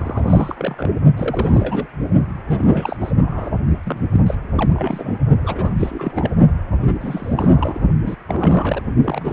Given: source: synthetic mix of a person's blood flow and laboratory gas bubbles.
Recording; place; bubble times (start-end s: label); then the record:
Doppler ultrasound of blood flow; precordium
0.00-0.89 s: bubbles
1.17-1.86 s: bubbles
2.47-2.98 s: bubbles
3.01-3.12 s: bubbles
3.21-3.51 s: bubbles
3.84-4.00 s: bubbles
4.11-4.21 s: bubbles
4.26-4.35 s: bubbles
4.55-5.18 s: bubbles
5.43-5.72 s: bubbles
5.76-6.31 s: bubbles
6.80-6.92 s: bubbles
7.00-7.82 s: bubbles
8.04-8.16 s: bubbles
8.28-8.81 s: bubbles
9.04-9.33 s: bubbles
From the record:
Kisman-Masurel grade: 332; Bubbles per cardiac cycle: rolling drumbeat, 9 or more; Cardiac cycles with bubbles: 50 to 99%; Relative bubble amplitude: moderate (0.250 to 0.450); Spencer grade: 3 (all of the cardiac periods contain showers or single bubble signals, but not dominating or overriding the cardiac motion signals); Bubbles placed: only in the low amplitude regions of the cardiac cycle